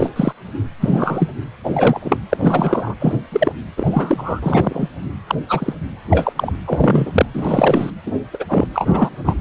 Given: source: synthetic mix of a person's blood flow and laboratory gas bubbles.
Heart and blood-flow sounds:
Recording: Doppler ultrasound of blood flow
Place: precordium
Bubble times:
0.00-0.10 s: bubbles
0.15-0.33 s: bubbles
0.80-1.29 s: bubbles
1.64-2.00 s: bubbles
2.04-2.18 s: bubbles
2.29-2.95 s: bubbles
3.00-3.15 s: bubbles
3.32-3.52 s: bubbles
3.76-4.90 s: bubbles
5.27-5.35 s: bubbles
5.48-5.74 s: bubbles
6.10-6.33 s: bubbles
6.36-6.53 s: bubbles
6.66-7.25 s: bubbles
7.33-7.90 s: bubbles
8.05-8.12 s: bubbles
8.33-8.45 s: bubbles
8.48-8.67 s: bubbles
8.73-9.09 s: bubbles
9.23-9.34 s: bubbles
From the record:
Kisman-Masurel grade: 243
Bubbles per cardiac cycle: several, 3 to 8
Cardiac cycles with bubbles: 100%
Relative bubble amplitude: loud (0.450 to 0.775)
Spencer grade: 3 (all of the cardiac periods contain showers or single bubble signals, but not dominating or overriding the cardiac motion signals)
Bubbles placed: anywhere in the cardiac cycle

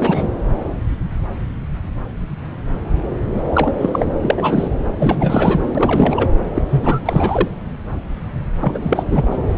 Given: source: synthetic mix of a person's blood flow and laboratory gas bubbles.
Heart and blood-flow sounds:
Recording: Doppler ultrasound of blood flow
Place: subclavian vein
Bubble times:
0.00-0.27 s: bubbles
3.35-3.41 s: bubbles
3.54-3.73 s: bubbles
3.78-4.12 s: bubbles
4.21-4.68 s: bubbles
4.99-5.72 s: bubbles
5.75-6.27 s: bubbles
6.55-6.62 s: bubbles
6.69-7.00 s: bubbles
7.05-7.48 s: bubbles
8.61-8.79 s: bubbles
8.82-9.03 s: bubbles
9.11-9.37 s: bubbles
From the record:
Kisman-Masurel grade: 333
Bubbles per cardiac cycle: rolling drumbeat, 9 or more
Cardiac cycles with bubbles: 50 to 99%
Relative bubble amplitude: loud (0.450 to 0.775)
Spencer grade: 3 (all of the cardiac periods contain showers or single bubble signals, but not dominating or overriding the cardiac motion signals)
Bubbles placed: anywhere in the cardiac cycle

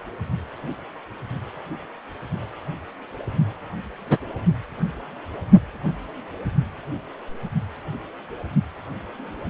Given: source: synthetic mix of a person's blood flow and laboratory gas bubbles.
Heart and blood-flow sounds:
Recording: Doppler ultrasound of blood flow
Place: precordium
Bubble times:
4.09-4.18 s: bubbles
From the record:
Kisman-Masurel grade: 113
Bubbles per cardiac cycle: 1 to 2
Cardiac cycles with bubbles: 1 to 10%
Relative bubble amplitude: loud (0.450 to 0.775)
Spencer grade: 1 (occasional bubble signal discernible with the cardiac motion signal, with majority of cardiac periods free of bubbles)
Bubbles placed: only in the low amplitude regions of the cardiac cycle

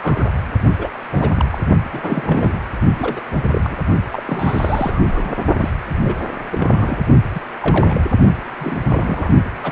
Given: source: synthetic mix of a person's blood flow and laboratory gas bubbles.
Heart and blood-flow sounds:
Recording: Doppler ultrasound of blood flow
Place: precordium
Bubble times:
0.01-0.31 s: bubbles
0.78-0.88 s: bubbles
1.10-1.29 s: bubbles
1.36-1.45 s: bubbles
1.50-1.58 s: bubbles
1.93-2.61 s: bubbles
2.98-3.21 s: bubbles
3.43-3.77 s: bubbles
4.10-4.23 s: bubbles
4.25-5.35 s: bubbles
5.59-5.71 s: bubbles
6.04-6.15 s: bubbles
6.50-6.98 s: bubbles
7.34-7.40 s: bubbles
7.62-8.01 s: bubbles
8.43-8.79 s: bubbles
8.88-9.29 s: bubbles
9.62-9.72 s: bubbles
From the record:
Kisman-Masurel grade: 242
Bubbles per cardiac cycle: several, 3 to 8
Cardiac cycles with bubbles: 100%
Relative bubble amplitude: moderate (0.250 to 0.450)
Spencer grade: 3 (all of the cardiac periods contain showers or single bubble signals, but not dominating or overriding the cardiac motion signals)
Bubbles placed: only in the low amplitude regions of the cardiac cycle

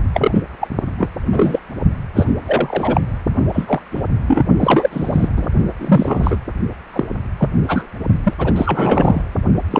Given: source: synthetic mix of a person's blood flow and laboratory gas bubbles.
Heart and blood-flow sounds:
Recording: Doppler ultrasound of blood flow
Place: precordium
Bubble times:
0.14-0.43 s: bubbles
0.60-0.68 s: bubbles
0.98-1.11 s: bubbles
1.31-1.59 s: bubbles
2.15-2.26 s: bubbles
2.46-3.01 s: bubbles
3.52-3.80 s: bubbles
3.91-4.02 s: bubbles
4.27-4.43 s: bubbles
4.59-5.29 s: bubbles
5.36-5.47 s: bubbles
5.79-6.37 s: bubbles
6.92-7.08 s: bubbles
7.38-7.48 s: bubbles
7.67-7.86 s: bubbles
8.23-8.34 s: bubbles
8.38-9.21 s: bubbles
9.70-9.80 s: bubbles
From the record:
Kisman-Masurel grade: 233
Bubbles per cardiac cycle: several, 3 to 8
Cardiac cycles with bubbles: 50 to 99%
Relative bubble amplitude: loud (0.450 to 0.775)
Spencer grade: 3 (all of the cardiac periods contain showers or single bubble signals, but not dominating or overriding the cardiac motion signals)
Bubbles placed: only in the low amplitude regions of the cardiac cycle

